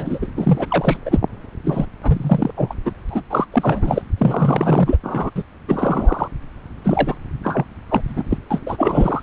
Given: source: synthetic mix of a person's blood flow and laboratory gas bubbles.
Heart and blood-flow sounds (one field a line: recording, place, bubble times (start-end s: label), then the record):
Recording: Doppler ultrasound of blood flow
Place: subclavian vein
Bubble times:
0.00-0.18 s: bubbles
0.22-0.26 s: bubbles
0.37-0.67 s: bubbles
0.69-0.97 s: bubbles
1.05-1.20 s: bubbles
1.64-1.86 s: bubbles
2.02-2.50 s: bubbles
2.56-2.75 s: bubbles
2.85-2.91 s: bubbles
3.09-3.21 s: bubbles
3.30-3.46 s: bubbles
3.52-4.02 s: bubbles
4.18-4.97 s: bubbles
5.03-5.31 s: bubbles
5.36-5.44 s: bubbles
5.68-6.28 s: bubbles
6.82-7.16 s: bubbles
7.43-7.66 s: bubbles
7.90-8.02 s: bubbles
8.07-8.38 s: bubbles
8.50-8.62 s: bubbles
8.66-9.22 s: bubbles
From the record:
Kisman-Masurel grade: 343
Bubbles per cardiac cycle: rolling drumbeat, 9 or more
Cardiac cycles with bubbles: 100%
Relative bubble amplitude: loud (0.450 to 0.775)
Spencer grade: 3 (all of the cardiac periods contain showers or single bubble signals, but not dominating or overriding the cardiac motion signals)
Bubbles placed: anywhere in the cardiac cycle